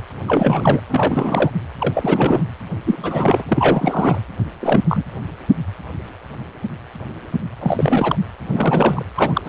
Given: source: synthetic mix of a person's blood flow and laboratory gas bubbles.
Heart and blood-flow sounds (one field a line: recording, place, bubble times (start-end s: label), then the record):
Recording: Doppler ultrasound of blood flow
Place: precordium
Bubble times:
0.27-0.80 s: bubbles
0.88-1.51 s: bubbles
1.80-2.45 s: bubbles
2.86-3.43 s: bubbles
3.49-4.18 s: bubbles
4.60-4.80 s: bubbles
4.88-5.04 s: bubbles
7.59-8.16 s: bubbles
8.46-9.04 s: bubbles
9.16-9.41 s: bubbles
9.44-9.49 s: bubbles
From the record:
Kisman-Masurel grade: 333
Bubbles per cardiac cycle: rolling drumbeat, 9 or more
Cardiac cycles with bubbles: 50 to 99%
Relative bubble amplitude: loud (0.450 to 0.775)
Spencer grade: 3 (all of the cardiac periods contain showers or single bubble signals, but not dominating or overriding the cardiac motion signals)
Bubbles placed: anywhere in the cardiac cycle